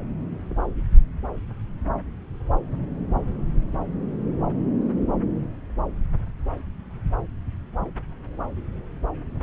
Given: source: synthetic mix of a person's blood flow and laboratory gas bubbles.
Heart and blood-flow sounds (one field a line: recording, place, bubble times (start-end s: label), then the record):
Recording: Doppler ultrasound of blood flow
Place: subclavian vein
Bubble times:
no bubbles
From the record:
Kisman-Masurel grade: 000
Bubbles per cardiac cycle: 0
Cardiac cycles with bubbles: 0%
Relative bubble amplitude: no bubbles discernible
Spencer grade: 0 (complete lack of bubble signals)